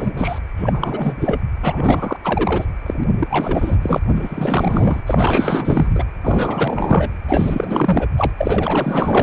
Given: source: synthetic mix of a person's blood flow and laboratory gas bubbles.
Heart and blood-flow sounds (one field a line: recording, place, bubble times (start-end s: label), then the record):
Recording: Doppler ultrasound of blood flow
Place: precordium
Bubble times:
0.00-0.12 s: bubbles
0.16-0.39 s: bubbles
0.56-1.41 s: bubbles
1.63-2.17 s: bubbles
2.24-2.67 s: bubbles
2.86-2.94 s: bubbles
2.98-3.05 s: bubbles
3.19-3.76 s: bubbles
3.82-3.99 s: bubbles
4.15-5.02 s: bubbles
5.07-6.05 s: bubbles
6.23-7.10 s: bubbles
7.28-8.07 s: bubbles
8.17-8.31 s: bubbles
8.37-9.23 s: bubbles
From the record:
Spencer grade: 4 (maximum detectable bubble signal sounding continuously throughout systole and diastole of every cardiac period, and overriding the amplitude of the normal cardiac signals)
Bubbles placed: anywhere in the cardiac cycle